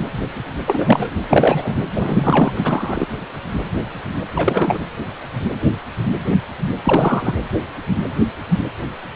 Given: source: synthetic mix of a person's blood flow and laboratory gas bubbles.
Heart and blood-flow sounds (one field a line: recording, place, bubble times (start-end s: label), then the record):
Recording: Doppler ultrasound of blood flow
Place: precordium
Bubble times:
0.66-1.13 s: bubbles
1.27-1.75 s: bubbles
1.95-2.52 s: bubbles
2.56-3.08 s: bubbles
4.36-4.78 s: bubbles
6.83-7.34 s: bubbles
From the record:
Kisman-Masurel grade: 333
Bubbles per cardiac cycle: rolling drumbeat, 9 or more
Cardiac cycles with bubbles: 50 to 99%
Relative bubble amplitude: loud (0.450 to 0.775)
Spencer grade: 3 (all of the cardiac periods contain showers or single bubble signals, but not dominating or overriding the cardiac motion signals)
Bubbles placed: anywhere in the cardiac cycle